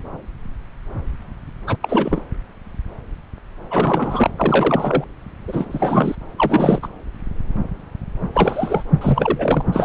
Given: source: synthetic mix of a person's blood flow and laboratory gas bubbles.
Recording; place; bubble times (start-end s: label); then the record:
Doppler ultrasound of blood flow; subclavian vein
1.66-1.76 s: bubbles
1.82-2.22 s: bubbles
3.71-4.30 s: bubbles
4.37-5.04 s: bubbles
5.47-6.16 s: bubbles
6.38-6.88 s: bubbles
8.33-8.84 s: bubbles
9.01-9.85 s: bubbles
From the record:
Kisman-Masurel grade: 333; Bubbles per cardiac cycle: rolling drumbeat, 9 or more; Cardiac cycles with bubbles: 50 to 99%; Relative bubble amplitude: loud (0.450 to 0.775); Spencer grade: 3 (all of the cardiac periods contain showers or single bubble signals, but not dominating or overriding the cardiac motion signals); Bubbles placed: anywhere in the cardiac cycle